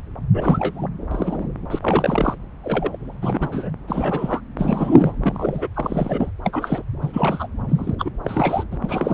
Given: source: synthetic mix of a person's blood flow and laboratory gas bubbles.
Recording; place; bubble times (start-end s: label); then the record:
Doppler ultrasound of blood flow; subclavian vein
0.33-0.87 s: bubbles
1.11-1.48 s: bubbles
1.71-1.79 s: bubbles
1.81-2.35 s: bubbles
2.63-2.96 s: bubbles
3.21-3.70 s: bubbles
3.88-4.41 s: bubbles
4.56-5.12 s: bubbles
5.24-5.68 s: bubbles
5.75-6.30 s: bubbles
6.44-6.83 s: bubbles
7.01-7.47 s: bubbles
7.68-7.95 s: bubbles
7.99-8.11 s: bubbles
8.24-8.64 s: bubbles
8.71-8.78 s: bubbles
8.82-9.14 s: bubbles
From the record:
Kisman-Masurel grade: 242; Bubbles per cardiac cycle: several, 3 to 8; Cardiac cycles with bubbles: 100%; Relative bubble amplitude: moderate (0.250 to 0.450); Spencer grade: 3 (all of the cardiac periods contain showers or single bubble signals, but not dominating or overriding the cardiac motion signals); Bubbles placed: anywhere in the cardiac cycle